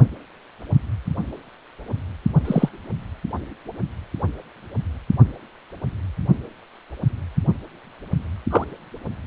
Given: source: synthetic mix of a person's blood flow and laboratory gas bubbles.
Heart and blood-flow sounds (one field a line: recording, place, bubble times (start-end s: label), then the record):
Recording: Doppler ultrasound of blood flow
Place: precordium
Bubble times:
2.45-2.69 s: bubbles
8.50-8.64 s: bubbles
From the record:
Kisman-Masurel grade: 123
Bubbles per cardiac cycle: 1 to 2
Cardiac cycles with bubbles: 10 to 50%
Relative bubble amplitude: loud (0.450 to 0.775)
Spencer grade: 2 (many but less than half of the cardiac periods contain bubble signals, singularly or in groups)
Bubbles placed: only in the low amplitude regions of the cardiac cycle